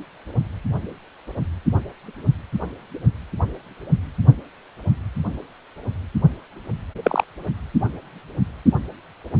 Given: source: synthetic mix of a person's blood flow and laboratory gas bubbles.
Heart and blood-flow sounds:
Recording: Doppler ultrasound of blood flow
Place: precordium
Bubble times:
7.03-7.24 s: bubbles
From the record:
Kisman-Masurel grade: 112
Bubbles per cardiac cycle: 1 to 2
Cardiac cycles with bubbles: 1 to 10%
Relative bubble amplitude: moderate (0.250 to 0.450)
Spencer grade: 1 (occasional bubble signal discernible with the cardiac motion signal, with majority of cardiac periods free of bubbles)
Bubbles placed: only in the low amplitude regions of the cardiac cycle

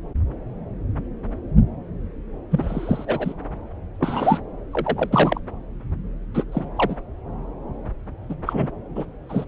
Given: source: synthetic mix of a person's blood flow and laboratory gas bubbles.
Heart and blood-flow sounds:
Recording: Doppler ultrasound of blood flow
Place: subclavian vein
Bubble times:
2.50-3.33 s: bubbles
3.99-4.40 s: bubbles
4.72-5.40 s: bubbles
6.34-6.44 s: bubbles
6.52-6.65 s: bubbles
6.76-6.96 s: bubbles
8.29-8.35 s: bubbles
8.46-8.71 s: bubbles
8.95-9.05 s: bubbles
9.29-9.45 s: bubbles
From the record:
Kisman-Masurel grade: 233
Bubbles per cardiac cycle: several, 3 to 8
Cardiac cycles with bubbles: 50 to 99%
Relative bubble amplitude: loud (0.450 to 0.775)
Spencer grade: 3 (all of the cardiac periods contain showers or single bubble signals, but not dominating or overriding the cardiac motion signals)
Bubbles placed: anywhere in the cardiac cycle

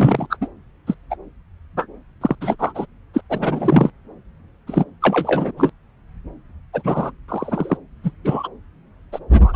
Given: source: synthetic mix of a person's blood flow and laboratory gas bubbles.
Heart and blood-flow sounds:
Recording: Doppler ultrasound of blood flow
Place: subclavian vein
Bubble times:
0.00-0.27 s: bubbles
0.30-0.36 s: bubbles
0.41-0.47 s: bubbles
0.86-0.94 s: bubbles
1.10-1.16 s: bubbles
1.76-1.86 s: bubbles
2.21-2.35 s: bubbles
2.41-2.56 s: bubbles
2.59-2.85 s: bubbles
3.14-3.21 s: bubbles
3.30-3.90 s: bubbles
4.67-4.84 s: bubbles
5.02-5.51 s: bubbles
5.56-5.71 s: bubbles
6.73-7.11 s: bubbles
7.28-7.77 s: bubbles
8.04-8.11 s: bubbles
8.24-8.49 s: bubbles
9.12-9.19 s: bubbles
9.31-9.56 s: bubbles
From the record:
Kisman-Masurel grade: 233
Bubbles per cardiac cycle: several, 3 to 8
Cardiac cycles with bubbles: 50 to 99%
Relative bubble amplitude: loud (0.450 to 0.775)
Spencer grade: 3 (all of the cardiac periods contain showers or single bubble signals, but not dominating or overriding the cardiac motion signals)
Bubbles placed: anywhere in the cardiac cycle

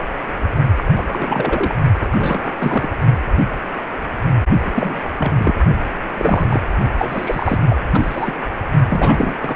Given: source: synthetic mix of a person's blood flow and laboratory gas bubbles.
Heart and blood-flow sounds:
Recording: Doppler ultrasound of blood flow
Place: precordium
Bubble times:
0.76-0.83 s: bubbles
0.96-1.76 s: bubbles
2.01-2.08 s: bubbles
2.12-2.90 s: bubbles
4.64-4.71 s: bubbles
4.74-5.00 s: bubbles
5.18-5.32 s: bubbles
5.38-5.54 s: bubbles
6.17-6.47 s: bubbles
6.50-6.60 s: bubbles
6.98-7.59 s: bubbles
7.68-7.77 s: bubbles
7.94-8.33 s: bubbles
8.89-9.34 s: bubbles
9.39-9.56 s: bubbles
From the record:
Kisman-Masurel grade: 332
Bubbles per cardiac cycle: rolling drumbeat, 9 or more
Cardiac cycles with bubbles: 50 to 99%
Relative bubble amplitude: moderate (0.250 to 0.450)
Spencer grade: 3 (all of the cardiac periods contain showers or single bubble signals, but not dominating or overriding the cardiac motion signals)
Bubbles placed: only in the low amplitude regions of the cardiac cycle

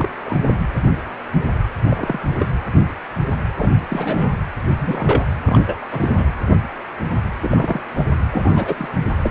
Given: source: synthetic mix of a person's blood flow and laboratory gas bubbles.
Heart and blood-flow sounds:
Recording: Doppler ultrasound of blood flow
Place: precordium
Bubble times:
0.00-0.09 s: bubbles
0.25-0.38 s: bubbles
1.87-2.20 s: bubbles
2.34-2.48 s: bubbles
3.58-3.71 s: bubbles
3.89-4.29 s: bubbles
4.78-5.25 s: bubbles
5.46-5.79 s: bubbles
5.92-6.27 s: bubbles
7.42-7.81 s: bubbles
7.98-8.05 s: bubbles
8.32-8.89 s: bubbles
9.22-9.31 s: bubbles
From the record:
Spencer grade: 3 (all of the cardiac periods contain showers or single bubble signals, but not dominating or overriding the cardiac motion signals)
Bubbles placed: anywhere in the cardiac cycle

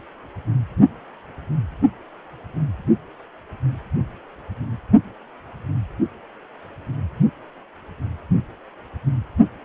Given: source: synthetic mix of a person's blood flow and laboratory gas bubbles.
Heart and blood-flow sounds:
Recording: Doppler ultrasound of blood flow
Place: precordium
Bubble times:
no bubbles
From the record:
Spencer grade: 0 (complete lack of bubble signals)

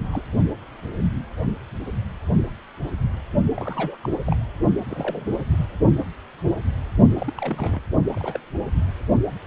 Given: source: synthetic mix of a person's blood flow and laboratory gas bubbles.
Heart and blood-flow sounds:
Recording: Doppler ultrasound of blood flow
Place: precordium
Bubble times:
0.12-0.22 s: bubbles
3.56-3.96 s: bubbles
4.02-4.09 s: bubbles
4.26-4.37 s: bubbles
4.85-5.25 s: bubbles
5.51-5.66 s: bubbles
7.18-7.33 s: bubbles
7.37-7.79 s: bubbles
7.93-8.41 s: bubbles
From the record:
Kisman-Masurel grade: 221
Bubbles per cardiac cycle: several, 3 to 8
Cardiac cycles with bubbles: 10 to 50%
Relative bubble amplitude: barely perceptible (0.100 to 0.250)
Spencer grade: 2 (many but less than half of the cardiac periods contain bubble signals, singularly or in groups)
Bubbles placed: only in the low amplitude regions of the cardiac cycle

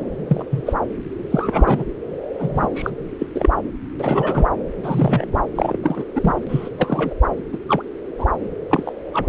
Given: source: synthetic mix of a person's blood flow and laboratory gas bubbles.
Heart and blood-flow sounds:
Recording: Doppler ultrasound of blood flow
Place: subclavian vein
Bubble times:
0.29-0.45 s: bubbles
0.51-0.74 s: bubbles
1.30-1.84 s: bubbles
2.39-2.68 s: bubbles
2.75-2.91 s: bubbles
3.19-3.26 s: bubbles
3.34-3.50 s: bubbles
4.00-4.48 s: bubbles
4.83-5.43 s: bubbles
5.55-5.77 s: bubbles
5.83-6.04 s: bubbles
6.15-6.34 s: bubbles
6.48-6.69 s: bubbles
6.77-7.14 s: bubbles
7.53-7.59 s: bubbles
7.68-7.82 s: bubbles
8.19-8.26 s: bubbles
8.70-8.92 s: bubbles
9.13-9.28 s: bubbles
From the record:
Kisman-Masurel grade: 242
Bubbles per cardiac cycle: several, 3 to 8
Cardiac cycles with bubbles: 100%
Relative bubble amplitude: moderate (0.250 to 0.450)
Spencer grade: 3 (all of the cardiac periods contain showers or single bubble signals, but not dominating or overriding the cardiac motion signals)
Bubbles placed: anywhere in the cardiac cycle

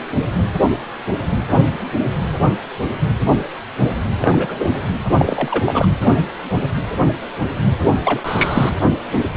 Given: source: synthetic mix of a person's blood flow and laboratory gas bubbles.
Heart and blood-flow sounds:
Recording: Doppler ultrasound of blood flow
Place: precordium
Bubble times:
4.21-4.80 s: bubbles
5.18-5.88 s: bubbles
7.81-7.94 s: bubbles
8.04-8.20 s: bubbles
8.24-8.70 s: bubbles
From the record:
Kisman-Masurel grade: 223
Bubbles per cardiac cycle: several, 3 to 8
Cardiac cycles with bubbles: 10 to 50%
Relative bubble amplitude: loud (0.450 to 0.775)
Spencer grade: 2 (many but less than half of the cardiac periods contain bubble signals, singularly or in groups)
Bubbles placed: anywhere in the cardiac cycle

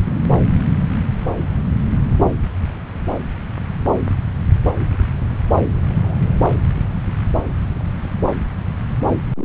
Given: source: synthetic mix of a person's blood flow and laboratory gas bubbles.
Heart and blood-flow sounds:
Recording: Doppler ultrasound of blood flow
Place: subclavian vein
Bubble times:
5.92-6.20 s: bubbles
9.36-9.45 s: bubbles
From the record:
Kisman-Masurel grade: 121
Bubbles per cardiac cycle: 1 to 2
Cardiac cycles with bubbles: 10 to 50%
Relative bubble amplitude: barely perceptible (0.100 to 0.250)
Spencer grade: 2 (many but less than half of the cardiac periods contain bubble signals, singularly or in groups)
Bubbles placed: anywhere in the cardiac cycle

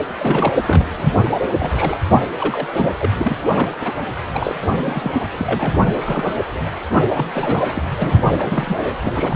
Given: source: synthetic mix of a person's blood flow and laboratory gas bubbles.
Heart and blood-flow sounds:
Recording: Doppler ultrasound of blood flow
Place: precordium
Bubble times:
0.19-0.52 s: bubbles
0.66-1.10 s: bubbles
1.24-1.29 s: bubbles
1.43-1.48 s: bubbles
1.60-1.98 s: bubbles
2.39-2.67 s: bubbles
2.71-2.91 s: bubbles
3.00-3.09 s: bubbles
3.19-3.37 s: bubbles
3.51-3.70 s: bubbles
3.72-3.76 s: bubbles
3.80-3.92 s: bubbles
4.25-4.55 s: bubbles
4.62-4.67 s: bubbles
4.85-5.11 s: bubbles
5.37-5.88 s: bubbles
6.04-6.34 s: bubbles
7.15-7.26 s: bubbles
7.33-7.65 s: bubbles
7.75-7.82 s: bubbles
7.97-8.22 s: bubbles
8.38-8.96 s: bubbles
9.01-9.36 s: bubbles
From the record:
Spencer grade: 3 (all of the cardiac periods contain showers or single bubble signals, but not dominating or overriding the cardiac motion signals)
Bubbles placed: anywhere in the cardiac cycle

